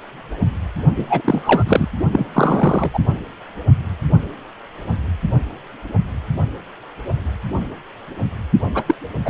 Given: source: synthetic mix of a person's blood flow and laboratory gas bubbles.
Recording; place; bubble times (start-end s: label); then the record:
Doppler ultrasound of blood flow; precordium
0.96-1.06 s: bubbles
1.09-1.22 s: bubbles
1.25-1.64 s: bubbles
1.67-1.87 s: bubbles
2.12-2.26 s: bubbles
2.33-3.00 s: bubbles
8.75-8.84 s: bubbles
8.86-8.95 s: bubbles
9.25-9.30 s: bubbles
From the record:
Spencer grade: 2 (many but less than half of the cardiac periods contain bubble signals, singularly or in groups); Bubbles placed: only in the low amplitude regions of the cardiac cycle